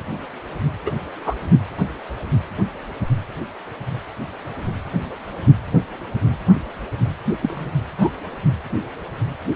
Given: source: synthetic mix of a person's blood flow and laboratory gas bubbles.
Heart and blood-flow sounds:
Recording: Doppler ultrasound of blood flow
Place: precordium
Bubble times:
0.85-0.92 s: bubbles
1.25-1.35 s: bubbles
7.42-7.73 s: bubbles
7.98-8.10 s: bubbles
From the record:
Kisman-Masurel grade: 122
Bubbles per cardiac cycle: 1 to 2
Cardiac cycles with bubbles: 10 to 50%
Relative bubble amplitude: moderate (0.250 to 0.450)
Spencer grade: 2 (many but less than half of the cardiac periods contain bubble signals, singularly or in groups)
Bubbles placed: anywhere in the cardiac cycle

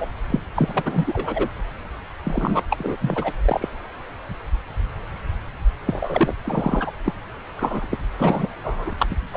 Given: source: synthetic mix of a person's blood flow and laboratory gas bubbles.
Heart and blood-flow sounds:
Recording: Doppler ultrasound of blood flow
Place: subclavian vein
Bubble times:
0.00-0.07 s: bubbles
0.30-0.40 s: bubbles
0.55-1.49 s: bubbles
2.25-2.62 s: bubbles
2.70-2.97 s: bubbles
3.01-3.33 s: bubbles
3.45-3.69 s: bubbles
5.85-6.34 s: bubbles
6.44-6.92 s: bubbles
7.05-7.13 s: bubbles
7.57-7.87 s: bubbles
7.90-7.98 s: bubbles
8.18-8.47 s: bubbles
8.63-8.93 s: bubbles
8.99-9.06 s: bubbles
9.10-9.15 s: bubbles
9.32-9.37 s: bubbles
From the record:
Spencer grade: 3 (all of the cardiac periods contain showers or single bubble signals, but not dominating or overriding the cardiac motion signals)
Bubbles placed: anywhere in the cardiac cycle

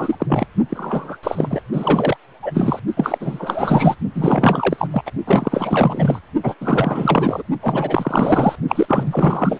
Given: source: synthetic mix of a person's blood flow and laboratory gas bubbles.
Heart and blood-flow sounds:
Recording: Doppler ultrasound of blood flow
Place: precordium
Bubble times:
0.00-0.15 s: bubbles
0.20-0.47 s: bubbles
0.69-1.17 s: bubbles
1.23-1.60 s: bubbles
1.72-2.17 s: bubbles
2.42-2.79 s: bubbles
2.96-3.95 s: bubbles
4.15-4.88 s: bubbles
4.91-5.03 s: bubbles
5.06-5.11 s: bubbles
5.27-6.19 s: bubbles
6.43-6.54 s: bubbles
6.60-7.42 s: bubbles
7.62-8.55 s: bubbles
8.68-9.60 s: bubbles
From the record:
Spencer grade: 4 (maximum detectable bubble signal sounding continuously throughout systole and diastole of every cardiac period, and overriding the amplitude of the normal cardiac signals)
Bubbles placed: only in the low amplitude regions of the cardiac cycle

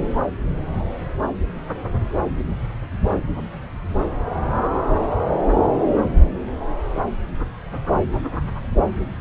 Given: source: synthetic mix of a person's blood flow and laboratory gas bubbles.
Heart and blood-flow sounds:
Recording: Doppler ultrasound of blood flow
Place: subclavian vein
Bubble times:
no bubbles
From the record:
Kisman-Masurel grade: 000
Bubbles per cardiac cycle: 0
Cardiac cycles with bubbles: 0%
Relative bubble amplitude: no bubbles discernible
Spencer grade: 0 (complete lack of bubble signals)

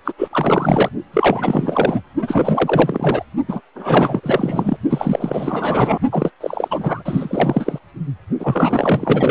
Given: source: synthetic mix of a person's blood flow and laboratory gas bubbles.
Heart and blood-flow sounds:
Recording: Doppler ultrasound of blood flow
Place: precordium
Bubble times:
0.05-0.12 s: bubbles
0.18-0.28 s: bubbles
0.31-0.90 s: bubbles
1.13-2.02 s: bubbles
2.21-3.24 s: bubbles
3.48-3.60 s: bubbles
3.75-4.20 s: bubbles
4.23-4.77 s: bubbles
4.89-5.99 s: bubbles
6.11-6.30 s: bubbles
6.40-6.68 s: bubbles
6.70-7.79 s: bubbles
8.39-9.31 s: bubbles
From the record:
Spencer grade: 4 (maximum detectable bubble signal sounding continuously throughout systole and diastole of every cardiac period, and overriding the amplitude of the normal cardiac signals)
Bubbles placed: only in the low amplitude regions of the cardiac cycle

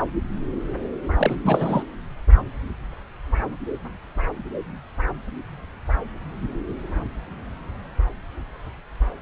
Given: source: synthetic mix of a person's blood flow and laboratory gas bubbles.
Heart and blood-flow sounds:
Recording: Doppler ultrasound of blood flow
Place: subclavian vein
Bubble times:
1.17-1.83 s: bubbles
From the record:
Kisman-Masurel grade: 222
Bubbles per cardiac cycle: several, 3 to 8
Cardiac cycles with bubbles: 10 to 50%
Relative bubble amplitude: moderate (0.250 to 0.450)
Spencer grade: 2 (many but less than half of the cardiac periods contain bubble signals, singularly or in groups)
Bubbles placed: anywhere in the cardiac cycle

